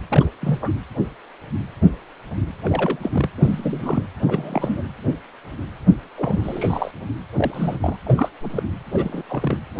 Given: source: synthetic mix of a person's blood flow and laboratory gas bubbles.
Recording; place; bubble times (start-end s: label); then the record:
Doppler ultrasound of blood flow; precordium
0.11-0.26 s: bubbles
0.41-0.58 s: bubbles
0.62-0.69 s: bubbles
2.61-2.99 s: bubbles
3.02-3.10 s: bubbles
3.13-3.29 s: bubbles
3.37-4.06 s: bubbles
4.26-4.82 s: bubbles
6.17-6.91 s: bubbles
7.37-7.79 s: bubbles
7.82-7.96 s: bubbles
8.04-8.29 s: bubbles
8.41-8.63 s: bubbles
8.93-9.23 s: bubbles
9.29-9.58 s: bubbles
9.78-9.80 s: bubbles
From the record:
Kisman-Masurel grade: 232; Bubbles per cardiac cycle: several, 3 to 8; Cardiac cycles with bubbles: 50 to 99%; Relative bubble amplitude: moderate (0.250 to 0.450); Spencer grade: 3 (all of the cardiac periods contain showers or single bubble signals, but not dominating or overriding the cardiac motion signals); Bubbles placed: anywhere in the cardiac cycle